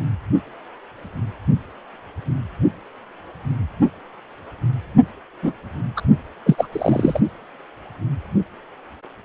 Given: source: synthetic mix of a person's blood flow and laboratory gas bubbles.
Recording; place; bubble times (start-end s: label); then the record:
Doppler ultrasound of blood flow; precordium
5.42-5.53 s: bubbles
5.96-6.01 s: bubbles
6.46-6.68 s: bubbles
6.72-7.21 s: bubbles
From the record:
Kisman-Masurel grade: 213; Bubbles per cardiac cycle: several, 3 to 8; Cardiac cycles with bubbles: 1 to 10%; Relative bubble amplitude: loud (0.450 to 0.775); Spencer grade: 1 (occasional bubble signal discernible with the cardiac motion signal, with majority of cardiac periods free of bubbles); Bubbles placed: only in the low amplitude regions of the cardiac cycle